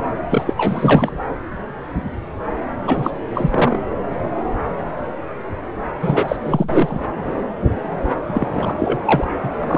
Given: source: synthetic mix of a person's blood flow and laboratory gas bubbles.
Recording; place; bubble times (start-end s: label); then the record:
Doppler ultrasound of blood flow; subclavian vein
0.30-0.44 s: bubbles
0.46-0.54 s: bubbles
0.56-1.11 s: bubbles
2.87-3.10 s: bubbles
3.35-3.79 s: bubbles
6.00-6.36 s: bubbles
6.44-7.05 s: bubbles
8.29-8.47 s: bubbles
8.54-9.00 s: bubbles
9.05-9.28 s: bubbles
9.44-9.51 s: bubbles
9.60-9.78 s: bubbles
From the record:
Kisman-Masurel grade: 332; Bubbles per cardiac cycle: rolling drumbeat, 9 or more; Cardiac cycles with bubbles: 50 to 99%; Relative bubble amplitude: moderate (0.250 to 0.450); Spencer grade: 3 (all of the cardiac periods contain showers or single bubble signals, but not dominating or overriding the cardiac motion signals); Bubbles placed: anywhere in the cardiac cycle